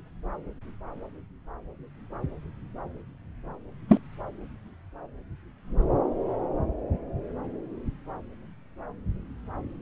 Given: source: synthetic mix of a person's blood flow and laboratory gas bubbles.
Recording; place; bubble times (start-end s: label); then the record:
Doppler ultrasound of blood flow; subclavian vein
3.88-3.98 s: bubbles
From the record:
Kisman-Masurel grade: 113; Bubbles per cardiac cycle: 1 to 2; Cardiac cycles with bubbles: 1 to 10%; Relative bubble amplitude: loud (0.450 to 0.775); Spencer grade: 1 (occasional bubble signal discernible with the cardiac motion signal, with majority of cardiac periods free of bubbles); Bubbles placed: anywhere in the cardiac cycle